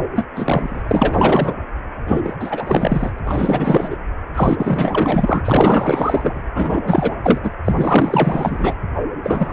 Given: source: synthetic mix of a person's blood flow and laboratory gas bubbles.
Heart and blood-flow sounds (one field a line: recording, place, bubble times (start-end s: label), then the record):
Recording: Doppler ultrasound of blood flow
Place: precordium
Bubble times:
0.15-0.27 s: bubbles
0.35-0.83 s: bubbles
0.88-1.54 s: bubbles
2.07-2.36 s: bubbles
2.40-3.10 s: bubbles
3.25-3.97 s: bubbles
4.34-5.42 s: bubbles
5.44-6.43 s: bubbles
6.54-6.80 s: bubbles
6.85-7.15 s: bubbles
7.23-7.40 s: bubbles
7.43-7.50 s: bubbles
7.64-8.74 s: bubbles
9.23-9.53 s: bubbles
From the record:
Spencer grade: 4 (maximum detectable bubble signal sounding continuously throughout systole and diastole of every cardiac period, and overriding the amplitude of the normal cardiac signals)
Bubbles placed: anywhere in the cardiac cycle